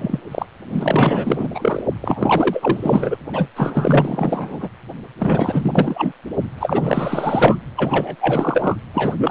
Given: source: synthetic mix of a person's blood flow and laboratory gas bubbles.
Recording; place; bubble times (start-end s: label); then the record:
Doppler ultrasound of blood flow; precordium
0.00-0.20 s: bubbles
0.31-0.46 s: bubbles
0.68-1.48 s: bubbles
1.54-1.83 s: bubbles
2.01-3.18 s: bubbles
3.33-3.50 s: bubbles
3.56-4.68 s: bubbles
5.19-6.12 s: bubbles
6.57-7.59 s: bubbles
7.76-8.16 s: bubbles
8.19-8.76 s: bubbles
8.93-9.31 s: bubbles
From the record:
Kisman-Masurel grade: 444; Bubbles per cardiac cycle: continuous sound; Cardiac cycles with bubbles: 100%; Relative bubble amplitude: maximal (0.775 to 0.999); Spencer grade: 4 (maximum detectable bubble signal sounding continuously throughout systole and diastole of every cardiac period, and overriding the amplitude of the normal cardiac signals); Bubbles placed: anywhere in the cardiac cycle